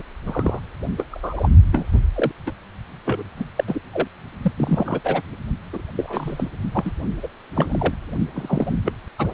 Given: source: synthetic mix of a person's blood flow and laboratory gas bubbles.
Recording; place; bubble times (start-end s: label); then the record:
Doppler ultrasound of blood flow; precordium
0.00-0.02 s: bubbles
0.25-0.60 s: bubbles
0.97-1.07 s: bubbles
1.11-1.49 s: bubbles
1.72-1.86 s: bubbles
1.93-2.00 s: bubbles
2.15-2.31 s: bubbles
2.46-2.52 s: bubbles
3.05-3.24 s: bubbles
3.37-3.45 s: bubbles
3.56-3.64 s: bubbles
3.67-3.80 s: bubbles
3.92-4.08 s: bubbles
4.42-4.52 s: bubbles
4.57-5.00 s: bubbles
5.04-5.22 s: bubbles
5.73-5.82 s: bubbles
5.97-6.49 s: bubbles
6.73-6.91 s: bubbles
7.23-7.28 s: bubbles
7.55-7.94 s: bubbles
8.34-8.74 s: bubbles
8.85-8.93 s: bubbles
9.18-9.28 s: bubbles
From the record:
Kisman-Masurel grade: 232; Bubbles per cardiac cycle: several, 3 to 8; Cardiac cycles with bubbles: 50 to 99%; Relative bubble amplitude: moderate (0.250 to 0.450); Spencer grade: 3 (all of the cardiac periods contain showers or single bubble signals, but not dominating or overriding the cardiac motion signals); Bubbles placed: only in the low amplitude regions of the cardiac cycle